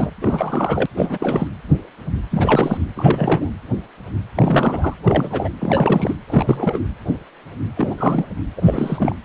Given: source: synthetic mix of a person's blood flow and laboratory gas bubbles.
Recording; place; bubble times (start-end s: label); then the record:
Doppler ultrasound of blood flow; precordium
0.00-0.10 s: bubbles
0.21-0.86 s: bubbles
0.96-1.48 s: bubbles
2.30-2.78 s: bubbles
2.96-3.50 s: bubbles
4.35-4.94 s: bubbles
5.03-5.49 s: bubbles
5.59-6.15 s: bubbles
6.28-6.81 s: bubbles
7.76-7.95 s: bubbles
7.97-8.28 s: bubbles
8.56-9.16 s: bubbles
From the record:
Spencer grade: 3 (all of the cardiac periods contain showers or single bubble signals, but not dominating or overriding the cardiac motion signals); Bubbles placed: anywhere in the cardiac cycle